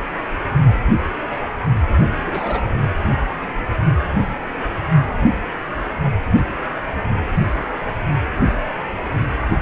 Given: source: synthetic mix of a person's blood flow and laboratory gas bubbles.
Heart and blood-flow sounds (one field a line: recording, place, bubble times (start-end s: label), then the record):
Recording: Doppler ultrasound of blood flow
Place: precordium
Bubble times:
2.24-2.62 s: bubbles
From the record:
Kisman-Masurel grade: 122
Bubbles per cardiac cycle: 1 to 2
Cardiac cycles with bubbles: 10 to 50%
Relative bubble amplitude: moderate (0.250 to 0.450)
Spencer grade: 2 (many but less than half of the cardiac periods contain bubble signals, singularly or in groups)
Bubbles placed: only in the low amplitude regions of the cardiac cycle